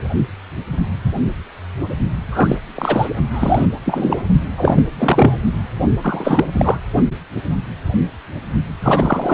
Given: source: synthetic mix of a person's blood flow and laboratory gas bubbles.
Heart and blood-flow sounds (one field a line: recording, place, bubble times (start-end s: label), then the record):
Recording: Doppler ultrasound of blood flow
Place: precordium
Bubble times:
2.31-2.58 s: bubbles
2.74-3.09 s: bubbles
3.34-3.65 s: bubbles
3.85-4.23 s: bubbles
4.56-5.44 s: bubbles
6.03-6.45 s: bubbles
6.53-6.78 s: bubbles
8.82-9.33 s: bubbles
From the record:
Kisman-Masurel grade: 223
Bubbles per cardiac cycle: several, 3 to 8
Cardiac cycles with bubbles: 10 to 50%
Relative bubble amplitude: loud (0.450 to 0.775)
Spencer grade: 2 (many but less than half of the cardiac periods contain bubble signals, singularly or in groups)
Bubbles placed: only in the low amplitude regions of the cardiac cycle